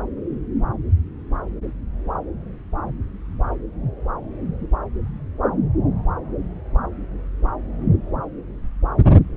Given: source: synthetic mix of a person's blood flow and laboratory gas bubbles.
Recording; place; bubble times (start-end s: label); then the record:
Doppler ultrasound of blood flow; subclavian vein
no bubbles
From the record:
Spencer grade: 0 (complete lack of bubble signals)